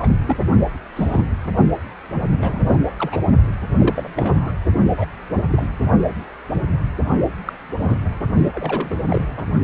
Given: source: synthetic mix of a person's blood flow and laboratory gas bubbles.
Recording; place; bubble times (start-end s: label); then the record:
Doppler ultrasound of blood flow; precordium
0.00-0.08 s: bubbles
0.26-0.37 s: bubbles
0.96-1.24 s: bubbles
2.31-2.67 s: bubbles
2.73-2.79 s: bubbles
2.99-3.17 s: bubbles
3.80-4.14 s: bubbles
4.16-4.52 s: bubbles
4.95-5.05 s: bubbles
5.50-5.67 s: bubbles
7.45-7.53 s: bubbles
7.79-7.96 s: bubbles
8.53-8.98 s: bubbles
9.08-9.25 s: bubbles
9.37-9.43 s: bubbles
From the record:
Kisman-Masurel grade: 232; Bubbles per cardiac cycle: several, 3 to 8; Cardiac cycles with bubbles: 50 to 99%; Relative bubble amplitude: moderate (0.250 to 0.450); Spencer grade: 3 (all of the cardiac periods contain showers or single bubble signals, but not dominating or overriding the cardiac motion signals); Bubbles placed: only in the low amplitude regions of the cardiac cycle